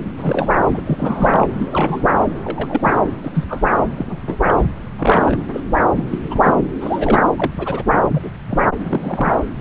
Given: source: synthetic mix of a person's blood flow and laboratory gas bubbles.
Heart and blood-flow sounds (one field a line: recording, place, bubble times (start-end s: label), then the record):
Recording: Doppler ultrasound of blood flow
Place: subclavian vein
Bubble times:
0.17-0.58 s: bubbles
0.67-0.81 s: bubbles
0.86-1.47 s: bubbles
1.52-2.04 s: bubbles
2.45-2.93 s: bubbles
3.24-3.60 s: bubbles
3.98-4.21 s: bubbles
4.26-4.38 s: bubbles
4.46-4.54 s: bubbles
4.58-4.62 s: bubbles
4.98-5.37 s: bubbles
5.53-5.61 s: bubbles
5.96-6.04 s: bubbles
6.11-6.19 s: bubbles
6.23-6.53 s: bubbles
6.80-7.21 s: bubbles
7.38-7.53 s: bubbles
7.58-7.84 s: bubbles
8.11-8.30 s: bubbles
8.49-8.60 s: bubbles
8.78-9.35 s: bubbles
From the record:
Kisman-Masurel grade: 242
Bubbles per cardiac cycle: several, 3 to 8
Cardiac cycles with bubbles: 100%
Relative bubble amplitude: moderate (0.250 to 0.450)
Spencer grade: 3 (all of the cardiac periods contain showers or single bubble signals, but not dominating or overriding the cardiac motion signals)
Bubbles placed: anywhere in the cardiac cycle